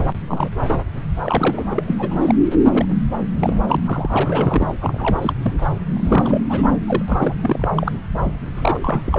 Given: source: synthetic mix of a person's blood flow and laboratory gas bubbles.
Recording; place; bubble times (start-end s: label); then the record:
Doppler ultrasound of blood flow; subclavian vein
0.00-0.05 s: bubbles
0.27-0.49 s: bubbles
0.68-0.80 s: bubbles
1.23-1.83 s: bubbles
1.88-1.96 s: bubbles
1.98-2.35 s: bubbles
2.71-2.97 s: bubbles
3.36-3.76 s: bubbles
3.84-4.75 s: bubbles
4.81-5.33 s: bubbles
5.42-5.51 s: bubbles
5.58-5.69 s: bubbles
5.93-6.41 s: bubbles
6.49-6.71 s: bubbles
6.87-7.02 s: bubbles
7.08-7.68 s: bubbles
7.77-7.92 s: bubbles
8.54-9.19 s: bubbles
From the record:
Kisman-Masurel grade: 342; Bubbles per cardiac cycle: rolling drumbeat, 9 or more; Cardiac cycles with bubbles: 100%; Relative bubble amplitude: moderate (0.250 to 0.450); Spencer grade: 3 (all of the cardiac periods contain showers or single bubble signals, but not dominating or overriding the cardiac motion signals); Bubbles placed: anywhere in the cardiac cycle